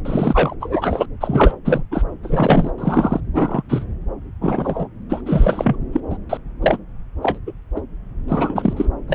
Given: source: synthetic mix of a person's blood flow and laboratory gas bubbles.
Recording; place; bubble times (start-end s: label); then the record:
Doppler ultrasound of blood flow; subclavian vein
0.05-0.55 s: bubbles
0.60-1.06 s: bubbles
1.20-1.55 s: bubbles
1.64-1.83 s: bubbles
1.91-2.03 s: bubbles
2.23-2.71 s: bubbles
2.78-3.21 s: bubbles
3.33-3.62 s: bubbles
3.68-3.84 s: bubbles
4.41-4.88 s: bubbles
5.09-5.21 s: bubbles
5.25-5.79 s: bubbles
5.92-6.00 s: bubbles
6.09-6.17 s: bubbles
6.29-6.37 s: bubbles
6.62-6.77 s: bubbles
7.22-7.38 s: bubbles
7.46-7.52 s: bubbles
7.75-7.81 s: bubbles
8.28-8.89 s: bubbles
9.08-9.14 s: bubbles
From the record:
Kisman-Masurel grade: 243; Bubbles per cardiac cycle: several, 3 to 8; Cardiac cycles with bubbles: 100%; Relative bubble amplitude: loud (0.450 to 0.775); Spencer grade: 3 (all of the cardiac periods contain showers or single bubble signals, but not dominating or overriding the cardiac motion signals); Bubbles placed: anywhere in the cardiac cycle